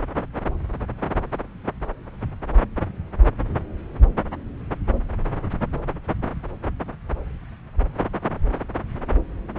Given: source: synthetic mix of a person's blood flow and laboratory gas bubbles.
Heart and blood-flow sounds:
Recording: Doppler ultrasound of blood flow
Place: subclavian vein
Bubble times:
no bubbles
From the record:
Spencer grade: 0 (complete lack of bubble signals)

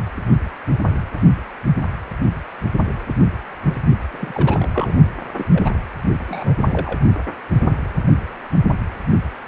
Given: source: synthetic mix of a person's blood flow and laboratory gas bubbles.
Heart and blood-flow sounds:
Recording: Doppler ultrasound of blood flow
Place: precordium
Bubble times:
4.12-4.70 s: bubbles
4.74-4.96 s: bubbles
5.36-5.71 s: bubbles
6.29-6.99 s: bubbles
From the record:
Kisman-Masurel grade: 221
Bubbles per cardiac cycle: several, 3 to 8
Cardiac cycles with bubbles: 10 to 50%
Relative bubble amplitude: barely perceptible (0.100 to 0.250)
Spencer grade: 2 (many but less than half of the cardiac periods contain bubble signals, singularly or in groups)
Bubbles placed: only in the low amplitude regions of the cardiac cycle

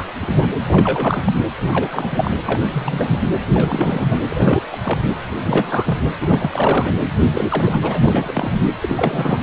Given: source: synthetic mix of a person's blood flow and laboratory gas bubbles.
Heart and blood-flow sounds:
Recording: Doppler ultrasound of blood flow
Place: precordium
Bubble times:
0.00-0.06 s: bubbles
0.20-0.47 s: bubbles
0.62-1.32 s: bubbles
1.66-2.42 s: bubbles
2.48-3.31 s: bubbles
3.54-4.19 s: bubbles
4.29-4.63 s: bubbles
4.71-4.77 s: bubbles
4.83-4.99 s: bubbles
5.09-5.16 s: bubbles
5.43-5.99 s: bubbles
6.21-6.92 s: bubbles
7.33-8.00 s: bubbles
8.03-8.70 s: bubbles
8.81-9.42 s: bubbles
From the record:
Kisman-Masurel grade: 342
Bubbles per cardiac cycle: rolling drumbeat, 9 or more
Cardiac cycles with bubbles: 100%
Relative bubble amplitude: moderate (0.250 to 0.450)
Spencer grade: 3 (all of the cardiac periods contain showers or single bubble signals, but not dominating or overriding the cardiac motion signals)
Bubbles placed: anywhere in the cardiac cycle

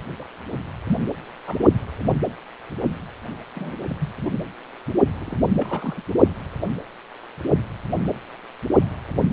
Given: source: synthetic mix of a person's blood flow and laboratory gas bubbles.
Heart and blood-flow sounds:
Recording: Doppler ultrasound of blood flow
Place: precordium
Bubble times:
0.18-0.24 s: bubbles
0.88-1.00 s: bubbles
1.02-1.16 s: bubbles
1.46-1.58 s: bubbles
3.54-3.97 s: bubbles
3.99-4.12 s: bubbles
4.24-4.35 s: bubbles
5.21-5.38 s: bubbles
5.59-6.02 s: bubbles
From the record:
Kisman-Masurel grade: 221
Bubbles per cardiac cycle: several, 3 to 8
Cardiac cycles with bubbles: 10 to 50%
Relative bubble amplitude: barely perceptible (0.100 to 0.250)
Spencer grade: 2 (many but less than half of the cardiac periods contain bubble signals, singularly or in groups)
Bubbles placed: only in the low amplitude regions of the cardiac cycle

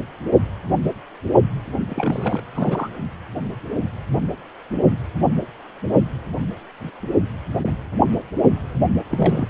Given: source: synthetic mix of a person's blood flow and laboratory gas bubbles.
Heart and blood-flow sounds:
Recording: Doppler ultrasound of blood flow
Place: precordium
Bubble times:
1.90-2.41 s: bubbles
2.54-2.90 s: bubbles
8.80-8.86 s: bubbles
9.10-9.46 s: bubbles
From the record:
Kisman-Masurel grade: 222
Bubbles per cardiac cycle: several, 3 to 8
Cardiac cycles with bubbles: 10 to 50%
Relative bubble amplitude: moderate (0.250 to 0.450)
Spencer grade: 2 (many but less than half of the cardiac periods contain bubble signals, singularly or in groups)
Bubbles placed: only in the low amplitude regions of the cardiac cycle

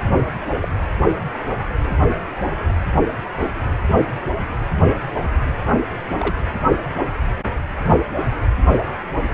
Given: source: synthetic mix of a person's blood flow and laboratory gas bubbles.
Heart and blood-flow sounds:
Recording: Doppler ultrasound of blood flow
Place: precordium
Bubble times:
0.61-0.68 s: bubbles
3.38-3.50 s: bubbles
6.21-6.35 s: bubbles
From the record:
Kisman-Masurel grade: 122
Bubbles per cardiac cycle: 1 to 2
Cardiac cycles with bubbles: 10 to 50%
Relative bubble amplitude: moderate (0.250 to 0.450)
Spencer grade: 2 (many but less than half of the cardiac periods contain bubble signals, singularly or in groups)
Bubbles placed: anywhere in the cardiac cycle

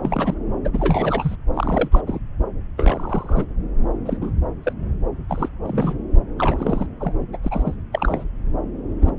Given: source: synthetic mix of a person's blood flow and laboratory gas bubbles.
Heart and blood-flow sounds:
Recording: Doppler ultrasound of blood flow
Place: subclavian vein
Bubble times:
0.02-0.35 s: bubbles
0.65-0.68 s: bubbles
0.73-1.35 s: bubbles
1.53-1.89 s: bubbles
1.91-2.01 s: bubbles
2.07-2.19 s: bubbles
2.77-3.45 s: bubbles
4.05-4.17 s: bubbles
4.21-4.32 s: bubbles
4.63-4.73 s: bubbles
5.29-5.49 s: bubbles
5.63-5.98 s: bubbles
6.38-6.87 s: bubbles
7.00-7.14 s: bubbles
7.32-7.38 s: bubbles
7.42-7.49 s: bubbles
7.51-7.76 s: bubbles
7.92-8.24 s: bubbles
9.01-9.12 s: bubbles
From the record:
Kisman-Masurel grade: 242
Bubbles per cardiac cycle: several, 3 to 8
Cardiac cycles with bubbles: 100%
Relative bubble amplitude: moderate (0.250 to 0.450)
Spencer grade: 3 (all of the cardiac periods contain showers or single bubble signals, but not dominating or overriding the cardiac motion signals)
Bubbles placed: anywhere in the cardiac cycle

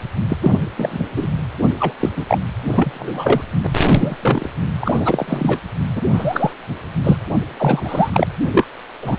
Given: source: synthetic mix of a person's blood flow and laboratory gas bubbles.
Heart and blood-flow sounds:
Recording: Doppler ultrasound of blood flow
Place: precordium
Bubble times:
0.28-0.37 s: bubbles
0.42-0.51 s: bubbles
0.78-1.02 s: bubbles
1.16-1.30 s: bubbles
1.79-1.93 s: bubbles
1.99-2.09 s: bubbles
2.16-2.38 s: bubbles
2.72-3.42 s: bubbles
3.62-3.67 s: bubbles
3.82-4.16 s: bubbles
4.22-4.47 s: bubbles
4.80-5.59 s: bubbles
5.95-6.02 s: bubbles
6.13-6.53 s: bubbles
7.04-7.17 s: bubbles
7.58-8.27 s: bubbles
8.52-8.65 s: bubbles
9.02-9.19 s: bubbles
From the record:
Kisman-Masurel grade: 243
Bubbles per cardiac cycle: several, 3 to 8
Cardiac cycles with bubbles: 100%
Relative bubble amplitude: loud (0.450 to 0.775)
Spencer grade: 3 (all of the cardiac periods contain showers or single bubble signals, but not dominating or overriding the cardiac motion signals)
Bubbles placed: anywhere in the cardiac cycle

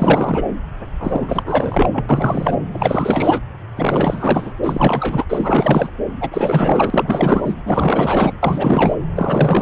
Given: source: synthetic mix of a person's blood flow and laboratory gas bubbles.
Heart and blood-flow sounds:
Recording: Doppler ultrasound of blood flow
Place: subclavian vein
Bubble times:
0.00-0.43 s: bubbles
0.99-2.06 s: bubbles
2.09-2.58 s: bubbles
2.73-3.41 s: bubbles
3.76-4.54 s: bubbles
4.62-5.25 s: bubbles
5.29-5.90 s: bubbles
6.20-7.55 s: bubbles
7.66-8.33 s: bubbles
8.42-8.95 s: bubbles
9.15-9.61 s: bubbles
From the record:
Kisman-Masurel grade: 444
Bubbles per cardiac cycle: continuous sound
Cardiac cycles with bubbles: 100%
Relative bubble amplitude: maximal (0.775 to 0.999)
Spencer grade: 4 (maximum detectable bubble signal sounding continuously throughout systole and diastole of every cardiac period, and overriding the amplitude of the normal cardiac signals)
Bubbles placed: anywhere in the cardiac cycle

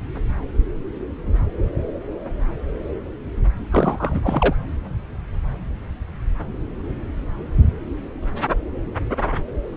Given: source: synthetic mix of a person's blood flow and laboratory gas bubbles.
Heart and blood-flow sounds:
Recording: Doppler ultrasound of blood flow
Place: subclavian vein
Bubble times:
3.72-4.54 s: bubbles
From the record:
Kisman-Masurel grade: 212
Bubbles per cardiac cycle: several, 3 to 8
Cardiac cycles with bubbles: 1 to 10%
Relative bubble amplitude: moderate (0.250 to 0.450)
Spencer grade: 1 (occasional bubble signal discernible with the cardiac motion signal, with majority of cardiac periods free of bubbles)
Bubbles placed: anywhere in the cardiac cycle

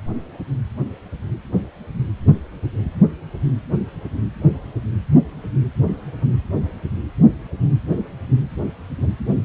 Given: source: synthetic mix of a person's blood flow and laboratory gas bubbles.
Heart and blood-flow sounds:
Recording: Doppler ultrasound of blood flow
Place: precordium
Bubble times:
no bubbles
From the record:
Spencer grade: 0 (complete lack of bubble signals)

